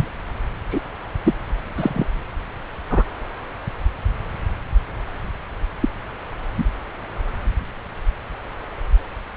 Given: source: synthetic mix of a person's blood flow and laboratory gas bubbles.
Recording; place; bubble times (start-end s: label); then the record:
Doppler ultrasound of blood flow; subclavian vein
0.00-0.09 s: bubbles
0.70-0.80 s: bubbles
1.24-1.33 s: bubbles
1.77-2.04 s: bubbles
2.90-3.03 s: bubbles
5.80-5.89 s: bubbles
6.58-6.64 s: bubbles
From the record:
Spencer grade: 2 (many but less than half of the cardiac periods contain bubble signals, singularly or in groups); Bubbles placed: anywhere in the cardiac cycle